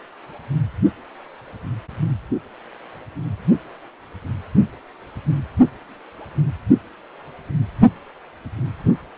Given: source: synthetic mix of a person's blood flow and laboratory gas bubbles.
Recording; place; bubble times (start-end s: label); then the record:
Doppler ultrasound of blood flow; precordium
no bubbles
From the record:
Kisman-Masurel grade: 000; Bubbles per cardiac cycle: 0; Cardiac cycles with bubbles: 0%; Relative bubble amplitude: no bubbles discernible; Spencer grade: 0 (complete lack of bubble signals)